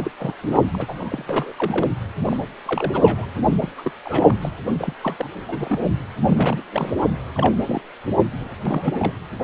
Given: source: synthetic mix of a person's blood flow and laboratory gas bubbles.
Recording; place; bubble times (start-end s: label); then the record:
Doppler ultrasound of blood flow; precordium
0.00-0.10 s: bubbles
0.19-0.34 s: bubbles
0.43-0.62 s: bubbles
0.74-1.52 s: bubbles
1.56-1.87 s: bubbles
2.24-2.37 s: bubbles
2.66-3.26 s: bubbles
3.60-3.69 s: bubbles
3.77-3.91 s: bubbles
4.05-4.37 s: bubbles
4.41-4.49 s: bubbles
4.79-4.93 s: bubbles
5.03-5.29 s: bubbles
5.48-5.82 s: bubbles
6.25-6.63 s: bubbles
6.72-6.92 s: bubbles
7.34-7.54 s: bubbles
7.67-7.82 s: bubbles
8.39-8.55 s: bubbles
8.65-9.13 s: bubbles
From the record:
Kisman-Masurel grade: 242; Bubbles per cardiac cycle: several, 3 to 8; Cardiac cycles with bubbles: 100%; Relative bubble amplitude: moderate (0.250 to 0.450); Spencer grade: 3 (all of the cardiac periods contain showers or single bubble signals, but not dominating or overriding the cardiac motion signals); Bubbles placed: anywhere in the cardiac cycle